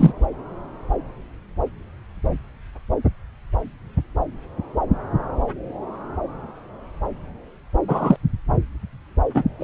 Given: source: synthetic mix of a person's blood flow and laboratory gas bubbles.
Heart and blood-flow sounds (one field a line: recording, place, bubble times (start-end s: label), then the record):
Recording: Doppler ultrasound of blood flow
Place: subclavian vein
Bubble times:
0.00-0.12 s: bubbles
7.87-8.16 s: bubbles
9.34-9.44 s: bubbles
9.59-9.64 s: bubbles
From the record:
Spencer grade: 2 (many but less than half of the cardiac periods contain bubble signals, singularly or in groups)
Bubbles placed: anywhere in the cardiac cycle